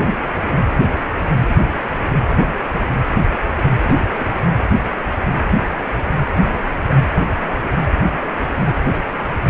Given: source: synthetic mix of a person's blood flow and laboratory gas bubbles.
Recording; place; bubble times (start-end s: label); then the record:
Doppler ultrasound of blood flow; precordium
3.83-4.08 s: bubbles
4.19-4.32 s: bubbles
From the record:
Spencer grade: 1 (occasional bubble signal discernible with the cardiac motion signal, with majority of cardiac periods free of bubbles); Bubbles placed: anywhere in the cardiac cycle